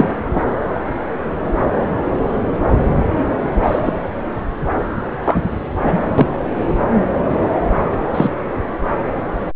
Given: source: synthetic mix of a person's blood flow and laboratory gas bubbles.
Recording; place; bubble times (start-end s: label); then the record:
Doppler ultrasound of blood flow; subclavian vein
0.00-0.09 s: bubbles
0.35-0.40 s: bubbles
3.62-3.94 s: bubbles
5.24-5.41 s: bubbles
5.83-6.00 s: bubbles
6.18-6.27 s: bubbles
8.14-8.30 s: bubbles
From the record:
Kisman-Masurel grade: 123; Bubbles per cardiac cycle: 1 to 2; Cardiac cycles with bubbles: 10 to 50%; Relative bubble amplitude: loud (0.450 to 0.775); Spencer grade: 2 (many but less than half of the cardiac periods contain bubble signals, singularly or in groups); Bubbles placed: anywhere in the cardiac cycle